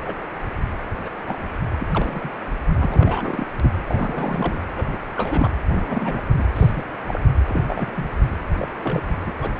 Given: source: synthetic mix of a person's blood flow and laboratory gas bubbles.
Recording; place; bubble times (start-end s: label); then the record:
Doppler ultrasound of blood flow; precordium
0.05-0.15 s: bubbles
1.04-1.09 s: bubbles
1.26-1.39 s: bubbles
1.79-1.87 s: bubbles
1.92-2.31 s: bubbles
2.77-3.47 s: bubbles
3.60-3.73 s: bubbles
3.87-4.59 s: bubbles
4.76-4.84 s: bubbles
4.92-4.97 s: bubbles
5.16-5.50 s: bubbles
5.71-6.21 s: bubbles
6.37-6.45 s: bubbles
6.54-6.84 s: bubbles
7.07-7.21 s: bubbles
7.49-7.62 s: bubbles
7.67-8.06 s: bubbles
8.58-8.69 s: bubbles
8.82-9.18 s: bubbles
9.26-9.32 s: bubbles
9.41-9.52 s: bubbles
From the record:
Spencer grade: 3 (all of the cardiac periods contain showers or single bubble signals, but not dominating or overriding the cardiac motion signals); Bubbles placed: anywhere in the cardiac cycle